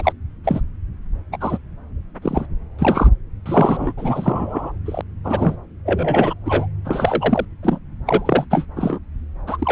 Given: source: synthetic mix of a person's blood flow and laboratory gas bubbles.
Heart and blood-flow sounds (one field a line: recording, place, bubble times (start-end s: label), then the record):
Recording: Doppler ultrasound of blood flow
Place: subclavian vein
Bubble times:
0.00-0.12 s: bubbles
0.44-0.60 s: bubbles
1.32-1.37 s: bubbles
1.40-1.58 s: bubbles
2.22-2.46 s: bubbles
2.79-3.07 s: bubbles
3.46-3.93 s: bubbles
3.97-4.72 s: bubbles
4.86-5.01 s: bubbles
5.24-5.57 s: bubbles
5.85-6.34 s: bubbles
6.45-6.68 s: bubbles
6.85-7.45 s: bubbles
7.62-7.79 s: bubbles
8.06-8.46 s: bubbles
8.50-8.65 s: bubbles
8.76-8.98 s: bubbles
9.46-9.72 s: bubbles
From the record:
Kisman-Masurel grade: 343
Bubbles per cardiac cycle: rolling drumbeat, 9 or more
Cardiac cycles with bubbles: 100%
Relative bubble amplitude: loud (0.450 to 0.775)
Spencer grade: 3 (all of the cardiac periods contain showers or single bubble signals, but not dominating or overriding the cardiac motion signals)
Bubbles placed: anywhere in the cardiac cycle